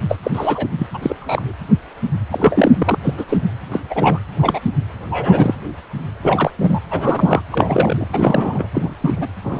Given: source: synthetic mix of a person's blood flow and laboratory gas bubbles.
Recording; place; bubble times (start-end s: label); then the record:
Doppler ultrasound of blood flow; precordium
0.08-0.18 s: bubbles
0.23-0.31 s: bubbles
0.35-0.68 s: bubbles
0.79-0.86 s: bubbles
0.93-0.99 s: bubbles
1.02-1.15 s: bubbles
1.19-1.52 s: bubbles
2.31-2.98 s: bubbles
3.03-3.14 s: bubbles
3.17-3.25 s: bubbles
3.29-3.38 s: bubbles
3.71-3.80 s: bubbles
3.90-4.19 s: bubbles
4.38-4.59 s: bubbles
4.62-4.71 s: bubbles
5.09-5.54 s: bubbles
6.22-6.51 s: bubbles
6.58-6.79 s: bubbles
6.91-7.42 s: bubbles
7.51-8.08 s: bubbles
8.12-8.67 s: bubbles
8.73-8.94 s: bubbles
9.00-9.30 s: bubbles
9.43-9.59 s: bubbles
From the record:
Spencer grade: 3 (all of the cardiac periods contain showers or single bubble signals, but not dominating or overriding the cardiac motion signals); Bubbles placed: anywhere in the cardiac cycle